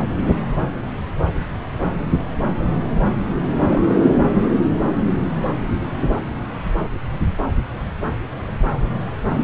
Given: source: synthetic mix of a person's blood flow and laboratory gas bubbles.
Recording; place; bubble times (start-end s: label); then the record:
Doppler ultrasound of blood flow; subclavian vein
3.70-3.83 s: bubbles
From the record:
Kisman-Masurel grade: 111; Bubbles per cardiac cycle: 1 to 2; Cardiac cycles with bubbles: 1 to 10%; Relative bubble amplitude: barely perceptible (0.100 to 0.250); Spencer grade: 1 (occasional bubble signal discernible with the cardiac motion signal, with majority of cardiac periods free of bubbles); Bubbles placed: anywhere in the cardiac cycle